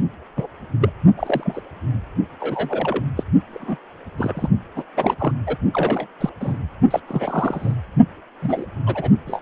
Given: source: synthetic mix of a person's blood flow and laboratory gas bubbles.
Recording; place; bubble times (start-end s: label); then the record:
Doppler ultrasound of blood flow; precordium
0.36-0.47 s: bubbles
0.80-0.90 s: bubbles
1.17-1.61 s: bubbles
2.40-3.04 s: bubbles
3.17-3.23 s: bubbles
3.51-3.77 s: bubbles
4.18-4.49 s: bubbles
4.75-4.83 s: bubbles
4.96-5.16 s: bubbles
5.19-5.33 s: bubbles
5.47-5.56 s: bubbles
5.74-6.06 s: bubbles
6.21-6.29 s: bubbles
6.41-6.58 s: bubbles
6.91-7.00 s: bubbles
7.07-7.74 s: bubbles
8.42-8.65 s: bubbles
8.86-9.10 s: bubbles
9.27-9.40 s: bubbles
From the record:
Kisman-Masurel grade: 232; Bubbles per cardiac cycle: several, 3 to 8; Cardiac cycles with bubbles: 50 to 99%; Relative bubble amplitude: moderate (0.250 to 0.450); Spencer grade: 3 (all of the cardiac periods contain showers or single bubble signals, but not dominating or overriding the cardiac motion signals); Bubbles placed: only in the low amplitude regions of the cardiac cycle